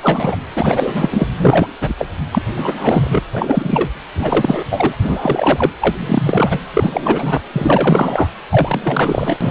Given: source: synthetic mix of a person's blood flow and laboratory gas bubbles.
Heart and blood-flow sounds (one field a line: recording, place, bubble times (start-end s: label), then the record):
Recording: Doppler ultrasound of blood flow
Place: precordium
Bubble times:
0.00-0.36 s: bubbles
0.57-1.28 s: bubbles
1.38-1.68 s: bubbles
1.80-1.95 s: bubbles
1.98-2.07 s: bubbles
2.32-2.42 s: bubbles
2.55-3.20 s: bubbles
3.32-3.90 s: bubbles
4.15-4.64 s: bubbles
4.70-4.95 s: bubbles
5.00-5.72 s: bubbles
5.81-6.60 s: bubbles
6.73-7.41 s: bubbles
7.53-8.27 s: bubbles
8.49-9.37 s: bubbles
9.40-9.50 s: bubbles
From the record:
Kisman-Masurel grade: 343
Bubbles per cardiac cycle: rolling drumbeat, 9 or more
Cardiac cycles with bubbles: 100%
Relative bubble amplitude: loud (0.450 to 0.775)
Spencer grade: 3 (all of the cardiac periods contain showers or single bubble signals, but not dominating or overriding the cardiac motion signals)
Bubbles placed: anywhere in the cardiac cycle